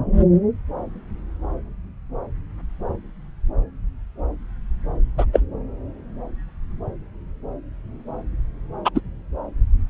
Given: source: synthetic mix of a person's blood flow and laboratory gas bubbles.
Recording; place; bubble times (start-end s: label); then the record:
Doppler ultrasound of blood flow; subclavian vein
5.18-5.25 s: bubbles
5.33-5.40 s: bubbles
8.85-8.90 s: bubbles
8.95-9.00 s: bubbles
From the record:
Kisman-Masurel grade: 123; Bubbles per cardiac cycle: 1 to 2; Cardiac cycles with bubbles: 10 to 50%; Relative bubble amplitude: loud (0.450 to 0.775); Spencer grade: 2 (many but less than half of the cardiac periods contain bubble signals, singularly or in groups); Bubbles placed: anywhere in the cardiac cycle